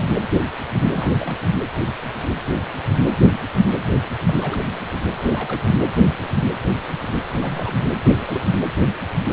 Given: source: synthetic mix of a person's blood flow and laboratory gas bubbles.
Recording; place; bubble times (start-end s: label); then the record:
Doppler ultrasound of blood flow; precordium
0.92-1.13 s: bubbles
1.18-1.38 s: bubbles
4.28-4.34 s: bubbles
4.40-4.61 s: bubbles
4.66-4.79 s: bubbles
5.17-5.75 s: bubbles
7.29-7.75 s: bubbles
8.04-8.45 s: bubbles
From the record:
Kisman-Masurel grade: 221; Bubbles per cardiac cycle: several, 3 to 8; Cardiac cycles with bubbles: 10 to 50%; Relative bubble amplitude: barely perceptible (0.100 to 0.250); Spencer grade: 2 (many but less than half of the cardiac periods contain bubble signals, singularly or in groups); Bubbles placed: anywhere in the cardiac cycle